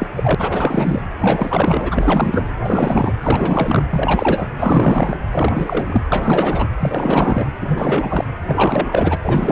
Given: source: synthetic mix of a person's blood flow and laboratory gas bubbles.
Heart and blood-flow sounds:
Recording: Doppler ultrasound of blood flow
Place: precordium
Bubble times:
0.00-0.09 s: bubbles
0.16-0.35 s: bubbles
0.37-1.02 s: bubbles
1.20-2.52 s: bubbles
2.64-3.13 s: bubbles
3.22-3.85 s: bubbles
3.90-4.47 s: bubbles
4.59-5.17 s: bubbles
5.30-6.04 s: bubbles
6.12-6.67 s: bubbles
6.79-7.46 s: bubbles
7.61-8.25 s: bubbles
8.47-9.17 s: bubbles
9.23-9.52 s: bubbles
From the record:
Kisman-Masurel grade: 444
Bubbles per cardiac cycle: continuous sound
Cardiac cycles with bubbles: 100%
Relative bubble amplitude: maximal (0.775 to 0.999)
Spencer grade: 4 (maximum detectable bubble signal sounding continuously throughout systole and diastole of every cardiac period, and overriding the amplitude of the normal cardiac signals)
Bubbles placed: anywhere in the cardiac cycle

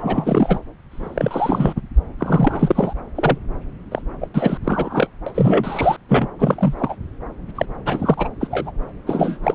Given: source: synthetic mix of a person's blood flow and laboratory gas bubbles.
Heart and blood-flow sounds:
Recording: Doppler ultrasound of blood flow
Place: subclavian vein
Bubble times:
0.00-0.60 s: bubbles
0.92-1.82 s: bubbles
2.19-2.93 s: bubbles
3.15-3.38 s: bubbles
3.91-4.02 s: bubbles
4.21-4.27 s: bubbles
4.34-4.58 s: bubbles
4.64-5.08 s: bubbles
5.26-5.32 s: bubbles
5.34-5.96 s: bubbles
6.08-6.27 s: bubbles
6.38-6.74 s: bubbles
6.78-6.96 s: bubbles
7.55-7.65 s: bubbles
7.86-8.29 s: bubbles
8.40-8.47 s: bubbles
8.50-8.72 s: bubbles
9.06-9.38 s: bubbles
9.43-9.55 s: bubbles
From the record:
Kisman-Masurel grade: 343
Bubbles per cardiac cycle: rolling drumbeat, 9 or more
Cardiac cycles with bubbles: 100%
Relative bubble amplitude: loud (0.450 to 0.775)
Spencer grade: 3 (all of the cardiac periods contain showers or single bubble signals, but not dominating or overriding the cardiac motion signals)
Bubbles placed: anywhere in the cardiac cycle

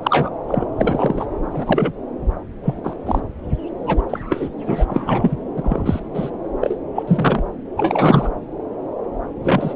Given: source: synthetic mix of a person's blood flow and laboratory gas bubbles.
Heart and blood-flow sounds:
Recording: Doppler ultrasound of blood flow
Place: subclavian vein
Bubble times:
0.03-0.30 s: bubbles
0.47-0.67 s: bubbles
0.78-1.25 s: bubbles
1.51-1.93 s: bubbles
2.63-2.76 s: bubbles
2.83-2.96 s: bubbles
3.05-3.22 s: bubbles
3.87-4.02 s: bubbles
4.09-4.20 s: bubbles
4.29-4.49 s: bubbles
4.67-5.37 s: bubbles
5.56-6.00 s: bubbles
6.14-6.30 s: bubbles
6.61-6.77 s: bubbles
6.95-7.03 s: bubbles
7.07-7.43 s: bubbles
7.77-8.29 s: bubbles
9.44-9.75 s: bubbles
From the record:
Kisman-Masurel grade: 243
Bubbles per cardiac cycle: several, 3 to 8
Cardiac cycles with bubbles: 100%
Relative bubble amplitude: loud (0.450 to 0.775)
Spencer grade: 3 (all of the cardiac periods contain showers or single bubble signals, but not dominating or overriding the cardiac motion signals)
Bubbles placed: anywhere in the cardiac cycle

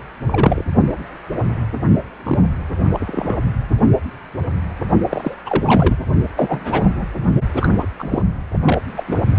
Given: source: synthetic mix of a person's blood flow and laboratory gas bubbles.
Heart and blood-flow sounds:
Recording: Doppler ultrasound of blood flow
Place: precordium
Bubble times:
0.28-0.63 s: bubbles
2.25-2.39 s: bubbles
2.93-3.40 s: bubbles
5.10-5.35 s: bubbles
5.46-5.95 s: bubbles
6.37-7.07 s: bubbles
7.54-7.87 s: bubbles
7.99-8.22 s: bubbles
8.65-8.79 s: bubbles
8.96-9.04 s: bubbles
9.07-9.22 s: bubbles
From the record:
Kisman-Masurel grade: 232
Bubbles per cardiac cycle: several, 3 to 8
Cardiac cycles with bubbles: 50 to 99%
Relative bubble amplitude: moderate (0.250 to 0.450)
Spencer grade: 3 (all of the cardiac periods contain showers or single bubble signals, but not dominating or overriding the cardiac motion signals)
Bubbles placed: only in the low amplitude regions of the cardiac cycle

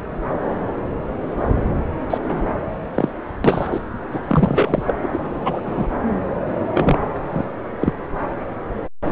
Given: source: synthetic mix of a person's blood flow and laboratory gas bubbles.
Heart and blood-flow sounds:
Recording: Doppler ultrasound of blood flow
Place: subclavian vein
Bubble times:
2.10-2.18 s: bubbles
2.23-2.43 s: bubbles
2.94-3.08 s: bubbles
3.44-3.79 s: bubbles
4.12-4.21 s: bubbles
4.27-4.95 s: bubbles
5.02-5.07 s: bubbles
5.13-5.19 s: bubbles
5.44-5.61 s: bubbles
5.65-5.88 s: bubbles
6.73-6.99 s: bubbles
7.30-7.46 s: bubbles
7.79-7.93 s: bubbles
From the record:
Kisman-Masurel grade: 233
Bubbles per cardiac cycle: several, 3 to 8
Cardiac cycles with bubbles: 50 to 99%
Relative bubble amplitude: loud (0.450 to 0.775)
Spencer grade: 3 (all of the cardiac periods contain showers or single bubble signals, but not dominating or overriding the cardiac motion signals)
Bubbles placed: anywhere in the cardiac cycle

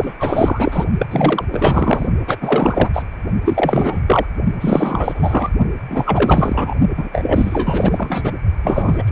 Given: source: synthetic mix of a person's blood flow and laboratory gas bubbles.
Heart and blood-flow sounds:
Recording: Doppler ultrasound of blood flow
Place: precordium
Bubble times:
0.00-0.14 s: bubbles
0.18-0.85 s: bubbles
0.99-1.08 s: bubbles
1.10-1.45 s: bubbles
1.51-2.07 s: bubbles
2.27-2.38 s: bubbles
2.41-2.90 s: bubbles
2.93-3.02 s: bubbles
3.45-4.01 s: bubbles
4.07-4.25 s: bubbles
4.60-5.50 s: bubbles
5.88-6.75 s: bubbles
6.97-7.09 s: bubbles
7.12-8.33 s: bubbles
8.63-9.12 s: bubbles
From the record:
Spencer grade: 4 (maximum detectable bubble signal sounding continuously throughout systole and diastole of every cardiac period, and overriding the amplitude of the normal cardiac signals)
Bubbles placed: only in the low amplitude regions of the cardiac cycle

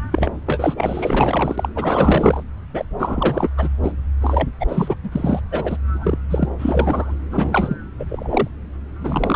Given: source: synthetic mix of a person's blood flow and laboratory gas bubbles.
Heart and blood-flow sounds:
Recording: Doppler ultrasound of blood flow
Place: subclavian vein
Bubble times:
0.11-0.32 s: bubbles
0.46-1.69 s: bubbles
1.76-2.43 s: bubbles
2.72-2.84 s: bubbles
2.99-3.50 s: bubbles
3.57-3.70 s: bubbles
3.82-3.92 s: bubbles
4.21-4.48 s: bubbles
4.59-4.96 s: bubbles
5.03-5.42 s: bubbles
5.51-5.77 s: bubbles
5.93-6.18 s: bubbles
6.29-6.49 s: bubbles
6.58-7.14 s: bubbles
7.31-7.76 s: bubbles
7.99-8.05 s: bubbles
8.09-8.48 s: bubbles
9.00-9.36 s: bubbles
From the record:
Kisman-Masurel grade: 444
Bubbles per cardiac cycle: continuous sound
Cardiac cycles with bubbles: 100%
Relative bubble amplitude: maximal (0.775 to 0.999)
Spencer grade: 4 (maximum detectable bubble signal sounding continuously throughout systole and diastole of every cardiac period, and overriding the amplitude of the normal cardiac signals)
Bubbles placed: anywhere in the cardiac cycle

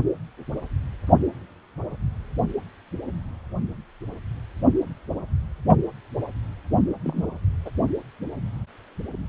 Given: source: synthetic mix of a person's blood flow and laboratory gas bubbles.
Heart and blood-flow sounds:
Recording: Doppler ultrasound of blood flow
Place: precordium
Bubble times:
7.04-7.26 s: bubbles
7.65-7.70 s: bubbles
From the record:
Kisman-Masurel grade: 121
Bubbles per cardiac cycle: 1 to 2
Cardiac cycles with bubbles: 10 to 50%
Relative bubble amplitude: barely perceptible (0.100 to 0.250)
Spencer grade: 2 (many but less than half of the cardiac periods contain bubble signals, singularly or in groups)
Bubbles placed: only in the low amplitude regions of the cardiac cycle

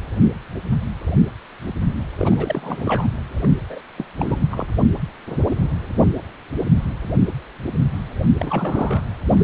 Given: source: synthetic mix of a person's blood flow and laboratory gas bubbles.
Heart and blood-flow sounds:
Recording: Doppler ultrasound of blood flow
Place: precordium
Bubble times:
2.18-3.07 s: bubbles
3.42-3.49 s: bubbles
3.52-3.82 s: bubbles
3.97-4.05 s: bubbles
4.17-4.41 s: bubbles
4.50-4.66 s: bubbles
8.38-9.02 s: bubbles
9.28-9.44 s: bubbles
From the record:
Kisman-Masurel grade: 332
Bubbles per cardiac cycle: rolling drumbeat, 9 or more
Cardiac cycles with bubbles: 50 to 99%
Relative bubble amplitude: moderate (0.250 to 0.450)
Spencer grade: 3 (all of the cardiac periods contain showers or single bubble signals, but not dominating or overriding the cardiac motion signals)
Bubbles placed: anywhere in the cardiac cycle

